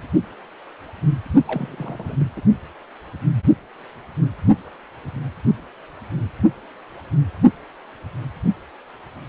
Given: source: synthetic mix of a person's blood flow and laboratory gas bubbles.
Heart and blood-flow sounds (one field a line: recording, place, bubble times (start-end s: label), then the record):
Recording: Doppler ultrasound of blood flow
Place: precordium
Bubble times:
1.47-2.17 s: bubbles
2.20-2.27 s: bubbles
2.36-2.41 s: bubbles
From the record:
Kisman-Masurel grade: 221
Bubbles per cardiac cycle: several, 3 to 8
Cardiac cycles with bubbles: 10 to 50%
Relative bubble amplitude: barely perceptible (0.100 to 0.250)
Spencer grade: 2 (many but less than half of the cardiac periods contain bubble signals, singularly or in groups)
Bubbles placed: only in the low amplitude regions of the cardiac cycle